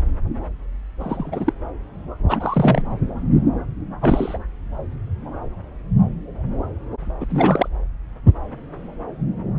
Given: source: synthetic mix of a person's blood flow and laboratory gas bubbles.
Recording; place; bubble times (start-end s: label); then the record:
Doppler ultrasound of blood flow; subclavian vein
0.99-1.53 s: bubbles
2.27-2.82 s: bubbles
4.01-4.38 s: bubbles
7.20-7.25 s: bubbles
7.30-7.68 s: bubbles
From the record:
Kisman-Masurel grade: 222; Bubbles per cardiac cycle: several, 3 to 8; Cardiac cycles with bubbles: 10 to 50%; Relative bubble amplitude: moderate (0.250 to 0.450); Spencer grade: 2 (many but less than half of the cardiac periods contain bubble signals, singularly or in groups); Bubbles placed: anywhere in the cardiac cycle